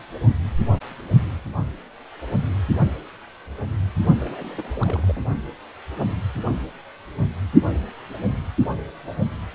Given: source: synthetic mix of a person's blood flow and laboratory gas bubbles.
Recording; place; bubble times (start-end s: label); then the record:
Doppler ultrasound of blood flow; precordium
4.15-5.25 s: bubbles
From the record:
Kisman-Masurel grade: 211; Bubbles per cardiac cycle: several, 3 to 8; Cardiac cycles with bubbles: 1 to 10%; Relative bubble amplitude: barely perceptible (0.100 to 0.250); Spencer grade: 1 (occasional bubble signal discernible with the cardiac motion signal, with majority of cardiac periods free of bubbles); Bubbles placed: only in the low amplitude regions of the cardiac cycle